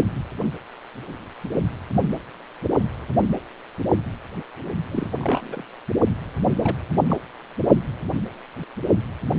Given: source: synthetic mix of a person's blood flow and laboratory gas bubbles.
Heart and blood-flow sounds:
Doppler ultrasound of blood flow; precordium
4.91-5.11 s: bubbles
5.21-5.65 s: bubbles
6.55-6.76 s: bubbles
7.08-7.17 s: bubbles
From the record:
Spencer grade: 2 (many but less than half of the cardiac periods contain bubble signals, singularly or in groups); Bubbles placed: only in the low amplitude regions of the cardiac cycle

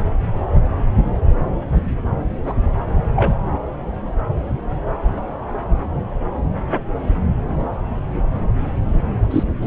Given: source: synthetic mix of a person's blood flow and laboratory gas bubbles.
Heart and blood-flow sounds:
Doppler ultrasound of blood flow; subclavian vein
2.44-2.54 s: bubbles
3.16-3.34 s: bubbles
9.30-9.43 s: bubbles
9.62-9.67 s: bubbles
From the record:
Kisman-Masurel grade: 122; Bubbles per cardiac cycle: 1 to 2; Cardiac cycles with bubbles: 10 to 50%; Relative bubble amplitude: moderate (0.250 to 0.450); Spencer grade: 2 (many but less than half of the cardiac periods contain bubble signals, singularly or in groups); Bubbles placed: anywhere in the cardiac cycle

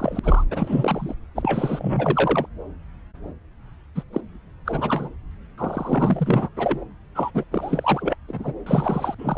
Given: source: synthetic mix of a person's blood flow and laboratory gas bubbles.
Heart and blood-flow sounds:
Doppler ultrasound of blood flow; subclavian vein
0.00-0.19 s: bubbles
0.24-0.44 s: bubbles
0.51-1.15 s: bubbles
1.36-2.46 s: bubbles
3.96-4.02 s: bubbles
4.12-4.21 s: bubbles
4.66-5.08 s: bubbles
5.58-6.48 s: bubbles
6.56-6.85 s: bubbles
7.15-7.31 s: bubbles
7.34-7.43 s: bubbles
7.51-8.14 s: bubbles
8.28-8.54 s: bubbles
8.66-9.15 s: bubbles
9.19-9.38 s: bubbles
From the record:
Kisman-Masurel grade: 332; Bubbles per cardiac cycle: rolling drumbeat, 9 or more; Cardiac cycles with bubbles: 50 to 99%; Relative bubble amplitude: moderate (0.250 to 0.450); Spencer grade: 3 (all of the cardiac periods contain showers or single bubble signals, but not dominating or overriding the cardiac motion signals); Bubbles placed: anywhere in the cardiac cycle

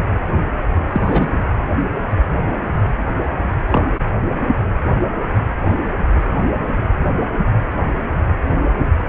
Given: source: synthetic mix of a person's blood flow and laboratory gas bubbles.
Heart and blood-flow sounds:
Doppler ultrasound of blood flow; precordium
0.90-1.31 s: bubbles
3.68-3.87 s: bubbles
From the record:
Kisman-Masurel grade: 123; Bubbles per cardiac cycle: 1 to 2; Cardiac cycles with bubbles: 10 to 50%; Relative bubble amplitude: loud (0.450 to 0.775); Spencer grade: 2 (many but less than half of the cardiac periods contain bubble signals, singularly or in groups); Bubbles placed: anywhere in the cardiac cycle

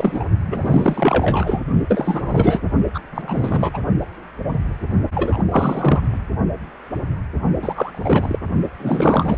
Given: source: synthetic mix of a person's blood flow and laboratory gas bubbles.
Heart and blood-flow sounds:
Doppler ultrasound of blood flow; precordium
0.00-0.25 s: bubbles
0.46-1.62 s: bubbles
1.89-2.60 s: bubbles
2.94-2.99 s: bubbles
3.11-3.71 s: bubbles
3.73-3.79 s: bubbles
5.14-5.43 s: bubbles
5.50-6.00 s: bubbles
7.62-8.38 s: bubbles
8.79-9.37 s: bubbles
From the record:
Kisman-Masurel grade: 333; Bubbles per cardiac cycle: rolling drumbeat, 9 or more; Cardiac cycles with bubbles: 50 to 99%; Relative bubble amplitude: loud (0.450 to 0.775); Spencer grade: 3 (all of the cardiac periods contain showers or single bubble signals, but not dominating or overriding the cardiac motion signals); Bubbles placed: only in the low amplitude regions of the cardiac cycle

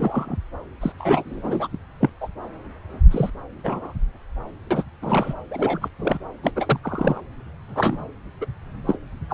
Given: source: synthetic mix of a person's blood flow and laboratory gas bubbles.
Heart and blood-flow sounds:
Doppler ultrasound of blood flow; subclavian vein
0.00-0.37 s: bubbles
0.80-0.92 s: bubbles
0.99-1.68 s: bubbles
1.72-1.77 s: bubbles
2.00-2.10 s: bubbles
2.21-2.28 s: bubbles
3.10-3.30 s: bubbles
3.64-3.94 s: bubbles
4.71-4.83 s: bubbles
5.01-5.33 s: bubbles
5.51-5.88 s: bubbles
6.00-6.17 s: bubbles
6.43-6.51 s: bubbles
6.55-6.79 s: bubbles
6.83-7.21 s: bubbles
7.68-8.04 s: bubbles
8.41-8.46 s: bubbles
8.86-8.96 s: bubbles
9.30-9.34 s: bubbles
From the record:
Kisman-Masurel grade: 242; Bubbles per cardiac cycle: several, 3 to 8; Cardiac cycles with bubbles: 100%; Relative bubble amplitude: moderate (0.250 to 0.450); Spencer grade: 3 (all of the cardiac periods contain showers or single bubble signals, but not dominating or overriding the cardiac motion signals); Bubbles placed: anywhere in the cardiac cycle

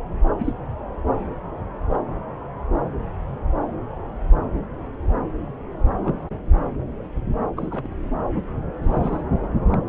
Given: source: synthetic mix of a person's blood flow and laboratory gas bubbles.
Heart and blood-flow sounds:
Doppler ultrasound of blood flow; subclavian vein
0.39-0.53 s: bubbles
1.94-1.99 s: bubbles
6.04-6.15 s: bubbles
7.57-7.88 s: bubbles
8.83-9.21 s: bubbles
9.71-9.78 s: bubbles
From the record:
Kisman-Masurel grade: 121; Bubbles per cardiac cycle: 1 to 2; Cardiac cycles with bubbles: 10 to 50%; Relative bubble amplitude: barely perceptible (0.100 to 0.250); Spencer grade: 2 (many but less than half of the cardiac periods contain bubble signals, singularly or in groups); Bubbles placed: anywhere in the cardiac cycle

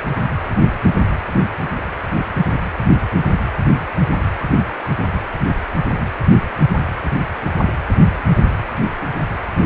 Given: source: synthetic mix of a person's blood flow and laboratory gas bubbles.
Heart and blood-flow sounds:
Doppler ultrasound of blood flow; precordium
no bubbles
From the record:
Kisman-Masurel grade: 000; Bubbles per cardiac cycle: 0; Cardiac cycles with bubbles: 0%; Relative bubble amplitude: no bubbles discernible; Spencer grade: 0 (complete lack of bubble signals)

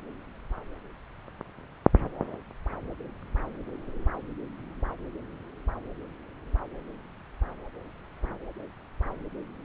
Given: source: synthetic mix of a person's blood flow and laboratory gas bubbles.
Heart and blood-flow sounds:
Doppler ultrasound of blood flow; subclavian vein
no bubbles
From the record:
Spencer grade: 0 (complete lack of bubble signals)

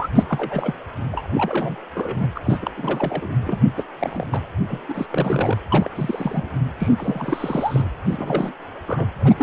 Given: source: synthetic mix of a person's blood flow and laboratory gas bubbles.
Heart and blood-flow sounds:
Doppler ultrasound of blood flow; precordium
0.00-0.08 s: bubbles
0.15-0.23 s: bubbles
0.28-0.74 s: bubbles
1.11-1.27 s: bubbles
1.34-1.76 s: bubbles
1.94-2.29 s: bubbles
2.35-2.40 s: bubbles
2.44-2.73 s: bubbles
2.77-3.31 s: bubbles
3.44-3.62 s: bubbles
3.76-3.84 s: bubbles
3.99-4.27 s: bubbles
4.31-4.41 s: bubbles
4.68-4.80 s: bubbles
4.88-5.58 s: bubbles
5.68-5.89 s: bubbles
5.95-6.49 s: bubbles
6.78-6.88 s: bubbles
6.97-7.88 s: bubbles
8.05-8.53 s: bubbles
8.87-9.07 s: bubbles
9.20-9.34 s: bubbles
9.38-9.43 s: bubbles
From the record:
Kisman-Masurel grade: 342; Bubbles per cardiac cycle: rolling drumbeat, 9 or more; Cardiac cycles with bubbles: 100%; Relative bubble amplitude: moderate (0.250 to 0.450); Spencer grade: 3 (all of the cardiac periods contain showers or single bubble signals, but not dominating or overriding the cardiac motion signals); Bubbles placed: anywhere in the cardiac cycle

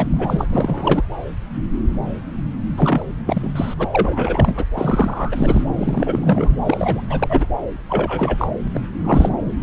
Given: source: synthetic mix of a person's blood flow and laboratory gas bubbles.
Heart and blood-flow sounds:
Doppler ultrasound of blood flow; subclavian vein
0.00-1.04 s: bubbles
2.76-3.06 s: bubbles
3.26-3.52 s: bubbles
3.55-3.74 s: bubbles
3.79-3.89 s: bubbles
3.93-4.65 s: bubbles
4.76-5.63 s: bubbles
5.74-6.56 s: bubbles
6.64-7.07 s: bubbles
7.09-7.46 s: bubbles
7.88-8.47 s: bubbles
8.66-8.68 s: bubbles
8.74-8.81 s: bubbles
9.04-9.29 s: bubbles
From the record:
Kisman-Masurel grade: 332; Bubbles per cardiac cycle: rolling drumbeat, 9 or more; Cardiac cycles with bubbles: 50 to 99%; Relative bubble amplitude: moderate (0.250 to 0.450); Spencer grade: 3 (all of the cardiac periods contain showers or single bubble signals, but not dominating or overriding the cardiac motion signals); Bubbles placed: anywhere in the cardiac cycle

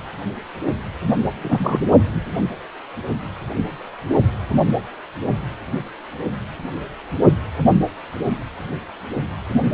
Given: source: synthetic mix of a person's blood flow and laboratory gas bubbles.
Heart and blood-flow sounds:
Doppler ultrasound of blood flow; precordium
1.43-1.86 s: bubbles
From the record:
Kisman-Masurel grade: 213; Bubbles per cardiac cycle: several, 3 to 8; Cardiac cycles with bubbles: 1 to 10%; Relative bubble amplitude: loud (0.450 to 0.775); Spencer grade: 1 (occasional bubble signal discernible with the cardiac motion signal, with majority of cardiac periods free of bubbles); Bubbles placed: only in the low amplitude regions of the cardiac cycle

